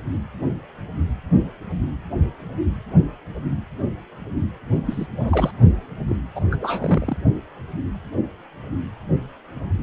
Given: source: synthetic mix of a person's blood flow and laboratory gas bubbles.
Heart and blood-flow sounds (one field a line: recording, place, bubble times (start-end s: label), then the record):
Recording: Doppler ultrasound of blood flow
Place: precordium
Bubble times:
4.86-5.06 s: bubbles
5.20-5.51 s: bubbles
6.08-6.16 s: bubbles
6.35-6.45 s: bubbles
6.51-7.17 s: bubbles
From the record:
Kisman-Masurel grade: 222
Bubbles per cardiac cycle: several, 3 to 8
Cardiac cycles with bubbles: 10 to 50%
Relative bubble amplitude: moderate (0.250 to 0.450)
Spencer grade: 2 (many but less than half of the cardiac periods contain bubble signals, singularly or in groups)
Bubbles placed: only in the low amplitude regions of the cardiac cycle